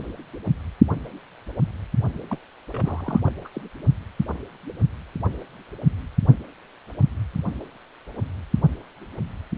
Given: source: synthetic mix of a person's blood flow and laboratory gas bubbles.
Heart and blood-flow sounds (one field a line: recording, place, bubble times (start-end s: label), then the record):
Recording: Doppler ultrasound of blood flow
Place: precordium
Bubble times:
2.28-2.39 s: bubbles
2.72-3.20 s: bubbles
3.25-3.31 s: bubbles
3.44-3.49 s: bubbles
3.53-3.62 s: bubbles
From the record:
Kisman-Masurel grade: 211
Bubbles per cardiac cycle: several, 3 to 8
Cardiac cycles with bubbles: 1 to 10%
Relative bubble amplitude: barely perceptible (0.100 to 0.250)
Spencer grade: 1 (occasional bubble signal discernible with the cardiac motion signal, with majority of cardiac periods free of bubbles)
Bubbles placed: only in the low amplitude regions of the cardiac cycle